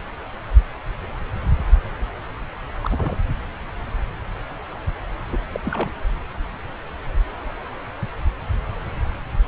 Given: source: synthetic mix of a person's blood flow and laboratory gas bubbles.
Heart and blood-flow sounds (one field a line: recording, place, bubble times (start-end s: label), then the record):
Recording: Doppler ultrasound of blood flow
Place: subclavian vein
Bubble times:
2.81-3.18 s: bubbles
5.32-5.38 s: bubbles
5.52-5.60 s: bubbles
5.64-5.91 s: bubbles
From the record:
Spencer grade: 2 (many but less than half of the cardiac periods contain bubble signals, singularly or in groups)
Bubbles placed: anywhere in the cardiac cycle